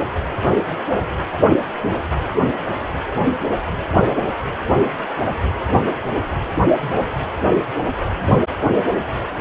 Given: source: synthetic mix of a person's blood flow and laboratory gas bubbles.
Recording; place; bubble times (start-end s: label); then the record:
Doppler ultrasound of blood flow; precordium
no bubbles
From the record:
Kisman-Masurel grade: 000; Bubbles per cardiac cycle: 0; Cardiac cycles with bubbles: 0%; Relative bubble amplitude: no bubbles discernible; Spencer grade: 0 (complete lack of bubble signals)